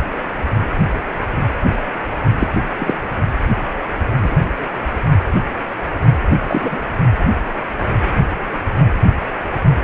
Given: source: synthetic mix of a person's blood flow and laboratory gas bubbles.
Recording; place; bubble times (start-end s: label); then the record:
Doppler ultrasound of blood flow; precordium
2.40-2.47 s: bubbles
2.78-2.94 s: bubbles
4.22-4.36 s: bubbles
6.47-6.77 s: bubbles
From the record:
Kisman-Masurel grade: 123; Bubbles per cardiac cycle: 1 to 2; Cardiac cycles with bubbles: 10 to 50%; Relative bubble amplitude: loud (0.450 to 0.775); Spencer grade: 2 (many but less than half of the cardiac periods contain bubble signals, singularly or in groups); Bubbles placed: anywhere in the cardiac cycle